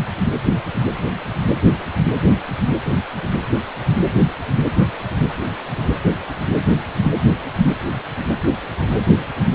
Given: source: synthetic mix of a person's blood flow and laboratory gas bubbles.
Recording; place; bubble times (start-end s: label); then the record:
Doppler ultrasound of blood flow; precordium
no bubbles
From the record:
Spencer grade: 0 (complete lack of bubble signals)